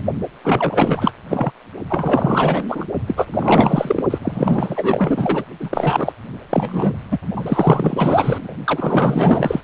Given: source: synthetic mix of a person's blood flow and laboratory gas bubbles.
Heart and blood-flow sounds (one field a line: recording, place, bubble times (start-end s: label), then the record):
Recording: Doppler ultrasound of blood flow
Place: precordium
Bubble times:
0.44-1.12 s: bubbles
1.29-1.51 s: bubbles
1.89-2.84 s: bubbles
3.07-3.27 s: bubbles
3.31-4.05 s: bubbles
4.10-4.19 s: bubbles
4.21-5.45 s: bubbles
5.60-6.12 s: bubbles
6.50-6.92 s: bubbles
7.11-7.19 s: bubbles
7.36-7.44 s: bubbles
7.46-8.54 s: bubbles
8.64-9.61 s: bubbles
From the record:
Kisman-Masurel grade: 444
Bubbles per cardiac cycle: continuous sound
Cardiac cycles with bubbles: 100%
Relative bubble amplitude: maximal (0.775 to 0.999)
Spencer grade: 4 (maximum detectable bubble signal sounding continuously throughout systole and diastole of every cardiac period, and overriding the amplitude of the normal cardiac signals)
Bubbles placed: only in the low amplitude regions of the cardiac cycle